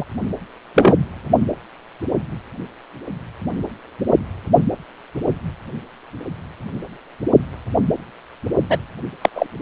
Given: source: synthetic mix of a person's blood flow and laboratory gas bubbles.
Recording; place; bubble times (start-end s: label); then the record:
Doppler ultrasound of blood flow; precordium
0.00-0.04 s: bubbles
0.74-0.96 s: bubbles
8.70-8.78 s: bubbles
9.21-9.29 s: bubbles
9.35-9.47 s: bubbles
From the record:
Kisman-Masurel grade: 223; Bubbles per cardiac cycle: several, 3 to 8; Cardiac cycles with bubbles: 10 to 50%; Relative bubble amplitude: loud (0.450 to 0.775); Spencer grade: 2 (many but less than half of the cardiac periods contain bubble signals, singularly or in groups); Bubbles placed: only in the low amplitude regions of the cardiac cycle